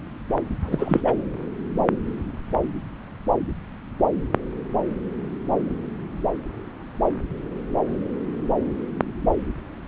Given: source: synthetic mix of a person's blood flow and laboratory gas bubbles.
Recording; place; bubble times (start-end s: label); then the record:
Doppler ultrasound of blood flow; subclavian vein
0.68-1.01 s: bubbles
1.03-1.16 s: bubbles
From the record:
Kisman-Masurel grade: 222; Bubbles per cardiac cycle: several, 3 to 8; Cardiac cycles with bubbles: 10 to 50%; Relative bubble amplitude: moderate (0.250 to 0.450); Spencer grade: 2 (many but less than half of the cardiac periods contain bubble signals, singularly or in groups); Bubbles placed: anywhere in the cardiac cycle